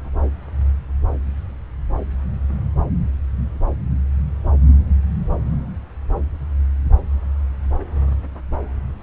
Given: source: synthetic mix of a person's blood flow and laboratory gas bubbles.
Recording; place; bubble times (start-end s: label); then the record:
Doppler ultrasound of blood flow; subclavian vein
no bubbles
From the record:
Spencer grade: 0 (complete lack of bubble signals)